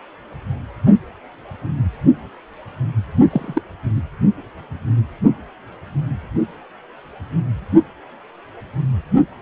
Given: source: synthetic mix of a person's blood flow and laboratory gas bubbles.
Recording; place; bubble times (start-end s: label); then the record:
Doppler ultrasound of blood flow; precordium
3.29-3.61 s: bubbles
3.96-4.01 s: bubbles
From the record:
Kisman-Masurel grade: 212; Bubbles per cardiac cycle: several, 3 to 8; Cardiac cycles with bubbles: 1 to 10%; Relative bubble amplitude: moderate (0.250 to 0.450); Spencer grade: 1 (occasional bubble signal discernible with the cardiac motion signal, with majority of cardiac periods free of bubbles); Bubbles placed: only in the low amplitude regions of the cardiac cycle